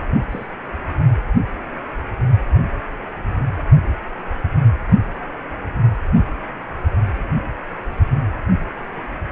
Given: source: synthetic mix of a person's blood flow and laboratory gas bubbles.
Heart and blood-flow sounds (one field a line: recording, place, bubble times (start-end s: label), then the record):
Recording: Doppler ultrasound of blood flow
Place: precordium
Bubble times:
0.30-0.46 s: bubbles
From the record:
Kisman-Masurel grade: 121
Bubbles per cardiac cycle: 1 to 2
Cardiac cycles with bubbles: 10 to 50%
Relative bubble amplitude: barely perceptible (0.100 to 0.250)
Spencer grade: 2 (many but less than half of the cardiac periods contain bubble signals, singularly or in groups)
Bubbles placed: only in the low amplitude regions of the cardiac cycle